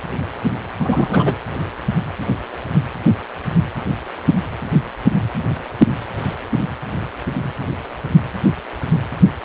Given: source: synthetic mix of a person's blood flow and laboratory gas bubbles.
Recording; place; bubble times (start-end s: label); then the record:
Doppler ultrasound of blood flow; precordium
0.78-1.35 s: bubbles
From the record:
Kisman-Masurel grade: 213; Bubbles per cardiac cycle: several, 3 to 8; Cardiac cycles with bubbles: 1 to 10%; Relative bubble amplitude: loud (0.450 to 0.775); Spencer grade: 1 (occasional bubble signal discernible with the cardiac motion signal, with majority of cardiac periods free of bubbles); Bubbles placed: anywhere in the cardiac cycle